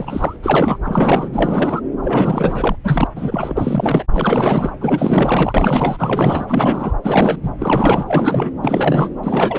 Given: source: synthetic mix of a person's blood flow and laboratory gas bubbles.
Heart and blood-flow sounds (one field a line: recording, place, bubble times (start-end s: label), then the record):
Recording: Doppler ultrasound of blood flow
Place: subclavian vein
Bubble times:
0.00-0.36 s: bubbles
0.42-0.77 s: bubbles
0.83-1.29 s: bubbles
1.32-1.81 s: bubbles
2.03-2.75 s: bubbles
2.83-3.08 s: bubbles
3.15-4.05 s: bubbles
4.12-4.69 s: bubbles
4.80-6.46 s: bubbles
6.48-6.93 s: bubbles
7.02-7.39 s: bubbles
7.42-7.50 s: bubbles
7.58-8.51 s: bubbles
8.62-9.10 s: bubbles
9.23-9.59 s: bubbles
From the record:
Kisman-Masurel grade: 444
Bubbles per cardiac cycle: continuous sound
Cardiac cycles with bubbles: 100%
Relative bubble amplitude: maximal (0.775 to 0.999)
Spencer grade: 4 (maximum detectable bubble signal sounding continuously throughout systole and diastole of every cardiac period, and overriding the amplitude of the normal cardiac signals)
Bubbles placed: anywhere in the cardiac cycle